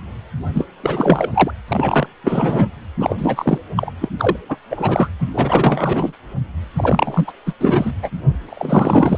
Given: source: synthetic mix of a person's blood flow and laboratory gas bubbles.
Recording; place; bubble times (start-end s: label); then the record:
Doppler ultrasound of blood flow; precordium
0.54-0.65 s: bubbles
0.83-1.30 s: bubbles
1.34-1.51 s: bubbles
1.68-2.07 s: bubbles
2.23-2.68 s: bubbles
2.98-3.58 s: bubbles
3.76-3.91 s: bubbles
4.00-4.09 s: bubbles
4.19-4.36 s: bubbles
4.49-4.57 s: bubbles
4.70-5.09 s: bubbles
5.19-6.12 s: bubbles
6.76-7.33 s: bubbles
7.46-7.53 s: bubbles
7.60-7.94 s: bubbles
8.03-8.10 s: bubbles
8.49-9.18 s: bubbles
From the record:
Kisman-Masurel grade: 343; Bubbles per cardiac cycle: rolling drumbeat, 9 or more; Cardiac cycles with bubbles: 100%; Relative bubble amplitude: loud (0.450 to 0.775); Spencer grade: 3 (all of the cardiac periods contain showers or single bubble signals, but not dominating or overriding the cardiac motion signals); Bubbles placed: anywhere in the cardiac cycle